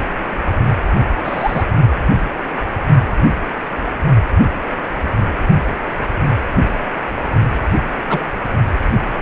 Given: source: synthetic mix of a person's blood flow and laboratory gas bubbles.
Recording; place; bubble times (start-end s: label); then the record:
Doppler ultrasound of blood flow; precordium
1.24-1.64 s: bubbles
8.09-8.20 s: bubbles
From the record:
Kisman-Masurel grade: 123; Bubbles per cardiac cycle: 1 to 2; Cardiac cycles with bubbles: 10 to 50%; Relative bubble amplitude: loud (0.450 to 0.775); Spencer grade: 2 (many but less than half of the cardiac periods contain bubble signals, singularly or in groups); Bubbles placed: only in the low amplitude regions of the cardiac cycle